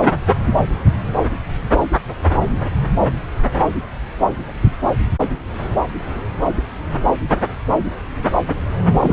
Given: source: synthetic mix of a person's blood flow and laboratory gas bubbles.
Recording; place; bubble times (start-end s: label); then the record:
Doppler ultrasound of blood flow; subclavian vein
9.00-9.12 s: bubbles
From the record:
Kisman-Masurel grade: 213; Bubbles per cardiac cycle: several, 3 to 8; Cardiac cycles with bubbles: 1 to 10%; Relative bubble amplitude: loud (0.450 to 0.775); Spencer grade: 1 (occasional bubble signal discernible with the cardiac motion signal, with majority of cardiac periods free of bubbles); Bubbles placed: anywhere in the cardiac cycle